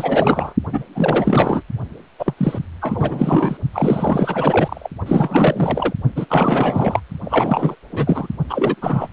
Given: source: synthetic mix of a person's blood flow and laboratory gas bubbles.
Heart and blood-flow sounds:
Doppler ultrasound of blood flow; precordium
0.00-0.53 s: bubbles
0.73-0.82 s: bubbles
0.95-1.62 s: bubbles
2.19-2.33 s: bubbles
2.37-2.59 s: bubbles
2.81-3.57 s: bubbles
3.73-4.88 s: bubbles
5.06-5.93 s: bubbles
6.15-6.25 s: bubbles
6.29-7.00 s: bubbles
7.24-7.75 s: bubbles
7.92-8.28 s: bubbles
8.49-8.75 s: bubbles
8.81-9.07 s: bubbles
From the record:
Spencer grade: 4 (maximum detectable bubble signal sounding continuously throughout systole and diastole of every cardiac period, and overriding the amplitude of the normal cardiac signals); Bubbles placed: only in the low amplitude regions of the cardiac cycle

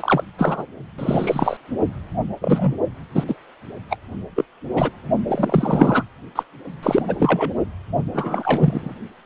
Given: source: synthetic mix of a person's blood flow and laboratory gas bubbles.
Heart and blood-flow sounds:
Doppler ultrasound of blood flow; precordium
0.00-0.23 s: bubbles
0.38-0.66 s: bubbles
0.98-1.57 s: bubbles
2.41-2.73 s: bubbles
3.15-3.24 s: bubbles
3.27-3.35 s: bubbles
3.90-3.97 s: bubbles
4.35-4.45 s: bubbles
4.75-4.90 s: bubbles
5.28-6.04 s: bubbles
6.35-6.43 s: bubbles
6.83-7.02 s: bubbles
7.08-7.16 s: bubbles
7.19-7.54 s: bubbles
8.13-8.95 s: bubbles
From the record:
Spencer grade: 3 (all of the cardiac periods contain showers or single bubble signals, but not dominating or overriding the cardiac motion signals); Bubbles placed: only in the low amplitude regions of the cardiac cycle

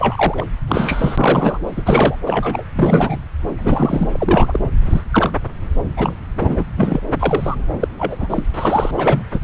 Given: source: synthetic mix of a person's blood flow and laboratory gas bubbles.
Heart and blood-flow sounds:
Doppler ultrasound of blood flow; subclavian vein
0.00-0.45 s: bubbles
0.68-1.58 s: bubbles
1.76-1.83 s: bubbles
1.85-2.16 s: bubbles
2.27-2.64 s: bubbles
2.75-3.19 s: bubbles
3.57-4.08 s: bubbles
4.12-4.60 s: bubbles
4.82-5.01 s: bubbles
5.12-5.30 s: bubbles
5.97-6.16 s: bubbles
6.40-6.64 s: bubbles
6.77-7.01 s: bubbles
7.19-7.55 s: bubbles
7.79-7.88 s: bubbles
7.98-8.16 s: bubbles
8.19-8.43 s: bubbles
8.54-8.91 s: bubbles
8.97-9.23 s: bubbles
9.32-9.39 s: bubbles
From the record:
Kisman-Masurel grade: 243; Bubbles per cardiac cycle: several, 3 to 8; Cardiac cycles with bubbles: 100%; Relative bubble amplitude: loud (0.450 to 0.775); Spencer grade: 3 (all of the cardiac periods contain showers or single bubble signals, but not dominating or overriding the cardiac motion signals); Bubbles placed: anywhere in the cardiac cycle

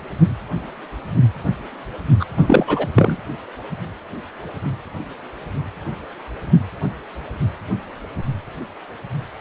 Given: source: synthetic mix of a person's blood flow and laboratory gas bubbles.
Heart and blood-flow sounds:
Doppler ultrasound of blood flow; precordium
2.19-2.25 s: bubbles
2.37-2.87 s: bubbles
2.96-3.17 s: bubbles
From the record:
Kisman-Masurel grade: 213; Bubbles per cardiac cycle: several, 3 to 8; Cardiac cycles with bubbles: 1 to 10%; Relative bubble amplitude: loud (0.450 to 0.775); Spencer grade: 1 (occasional bubble signal discernible with the cardiac motion signal, with majority of cardiac periods free of bubbles); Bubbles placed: only in the low amplitude regions of the cardiac cycle

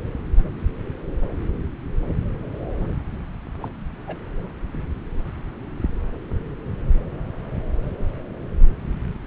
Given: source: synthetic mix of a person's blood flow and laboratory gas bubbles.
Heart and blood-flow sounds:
Doppler ultrasound of blood flow; subclavian vein
3.60-3.68 s: bubbles
4.08-4.16 s: bubbles
From the record:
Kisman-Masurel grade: 111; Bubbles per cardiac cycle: 1 to 2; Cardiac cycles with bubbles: 1 to 10%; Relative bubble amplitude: barely perceptible (0.100 to 0.250); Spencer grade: 1 (occasional bubble signal discernible with the cardiac motion signal, with majority of cardiac periods free of bubbles); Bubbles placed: anywhere in the cardiac cycle

